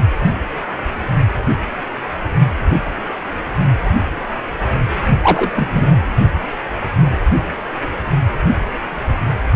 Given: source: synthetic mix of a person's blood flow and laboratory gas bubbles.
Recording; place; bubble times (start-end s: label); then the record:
Doppler ultrasound of blood flow; precordium
5.23-5.50 s: bubbles
5.56-5.87 s: bubbles
From the record:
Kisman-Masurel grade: 123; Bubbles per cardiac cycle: 1 to 2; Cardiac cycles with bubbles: 10 to 50%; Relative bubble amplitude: loud (0.450 to 0.775); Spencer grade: 2 (many but less than half of the cardiac periods contain bubble signals, singularly or in groups); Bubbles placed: anywhere in the cardiac cycle